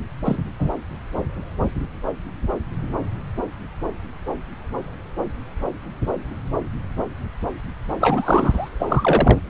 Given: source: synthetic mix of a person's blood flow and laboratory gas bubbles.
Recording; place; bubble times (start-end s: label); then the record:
Doppler ultrasound of blood flow; subclavian vein
0.25-0.37 s: bubbles
0.59-0.70 s: bubbles
8.00-8.69 s: bubbles
8.79-9.40 s: bubbles
From the record:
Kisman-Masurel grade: 223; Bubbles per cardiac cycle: several, 3 to 8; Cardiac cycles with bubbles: 10 to 50%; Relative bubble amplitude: loud (0.450 to 0.775); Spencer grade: 2 (many but less than half of the cardiac periods contain bubble signals, singularly or in groups); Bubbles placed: anywhere in the cardiac cycle